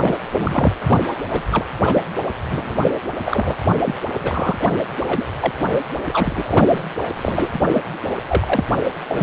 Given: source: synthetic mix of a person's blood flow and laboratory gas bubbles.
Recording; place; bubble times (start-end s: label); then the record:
Doppler ultrasound of blood flow; precordium
0.00-0.17 s: bubbles
0.33-0.74 s: bubbles
0.87-1.00 s: bubbles
1.30-1.43 s: bubbles
1.52-1.66 s: bubbles
1.86-2.03 s: bubbles
2.50-2.75 s: bubbles
2.82-2.91 s: bubbles
3.24-3.57 s: bubbles
3.71-3.78 s: bubbles
3.84-3.98 s: bubbles
4.20-4.69 s: bubbles
5.07-5.25 s: bubbles
5.40-5.53 s: bubbles
5.71-5.80 s: bubbles
6.07-6.83 s: bubbles
7.16-7.50 s: bubbles
7.53-7.59 s: bubbles
7.73-7.82 s: bubbles
8.27-8.64 s: bubbles
9.08-9.23 s: bubbles
From the record:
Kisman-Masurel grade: 242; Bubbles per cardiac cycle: several, 3 to 8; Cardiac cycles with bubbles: 100%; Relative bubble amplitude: moderate (0.250 to 0.450); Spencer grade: 3 (all of the cardiac periods contain showers or single bubble signals, but not dominating or overriding the cardiac motion signals); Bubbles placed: anywhere in the cardiac cycle